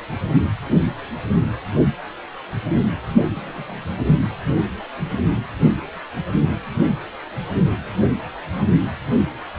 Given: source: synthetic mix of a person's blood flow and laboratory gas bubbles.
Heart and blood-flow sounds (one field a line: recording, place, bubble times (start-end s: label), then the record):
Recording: Doppler ultrasound of blood flow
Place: precordium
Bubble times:
3.25-3.29 s: bubbles
3.35-3.93 s: bubbles
4.25-4.29 s: bubbles
From the record:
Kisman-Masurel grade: 211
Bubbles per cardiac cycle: several, 3 to 8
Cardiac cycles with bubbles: 1 to 10%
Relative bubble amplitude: barely perceptible (0.100 to 0.250)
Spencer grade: 1 (occasional bubble signal discernible with the cardiac motion signal, with majority of cardiac periods free of bubbles)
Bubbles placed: only in the low amplitude regions of the cardiac cycle